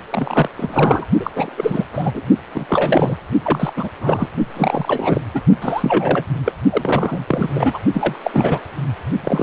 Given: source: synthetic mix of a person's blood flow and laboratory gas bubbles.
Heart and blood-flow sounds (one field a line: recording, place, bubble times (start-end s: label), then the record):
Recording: Doppler ultrasound of blood flow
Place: precordium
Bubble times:
0.10-0.48 s: bubbles
0.57-1.05 s: bubbles
1.19-1.30 s: bubbles
1.35-1.88 s: bubbles
1.92-2.10 s: bubbles
2.14-2.23 s: bubbles
2.54-2.66 s: bubbles
2.69-3.17 s: bubbles
3.44-3.73 s: bubbles
3.77-3.88 s: bubbles
4.00-4.28 s: bubbles
4.56-5.21 s: bubbles
5.34-5.42 s: bubbles
5.62-6.25 s: bubbles
6.45-6.52 s: bubbles
6.70-7.50 s: bubbles
7.54-7.79 s: bubbles
7.94-8.18 s: bubbles
8.24-8.61 s: bubbles
9.24-9.43 s: bubbles
From the record:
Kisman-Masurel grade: 343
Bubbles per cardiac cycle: rolling drumbeat, 9 or more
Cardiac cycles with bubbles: 100%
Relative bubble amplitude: loud (0.450 to 0.775)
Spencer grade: 3 (all of the cardiac periods contain showers or single bubble signals, but not dominating or overriding the cardiac motion signals)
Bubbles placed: only in the low amplitude regions of the cardiac cycle